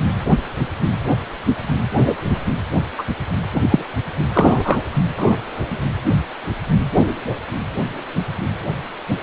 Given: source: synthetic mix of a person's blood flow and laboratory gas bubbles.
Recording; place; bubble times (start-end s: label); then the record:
Doppler ultrasound of blood flow; precordium
2.98-3.04 s: bubbles
3.52-3.84 s: bubbles
4.34-4.81 s: bubbles
5.17-5.36 s: bubbles
From the record:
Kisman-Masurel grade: 123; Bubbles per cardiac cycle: 1 to 2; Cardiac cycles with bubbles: 10 to 50%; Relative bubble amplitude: loud (0.450 to 0.775); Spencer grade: 2 (many but less than half of the cardiac periods contain bubble signals, singularly or in groups); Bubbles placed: anywhere in the cardiac cycle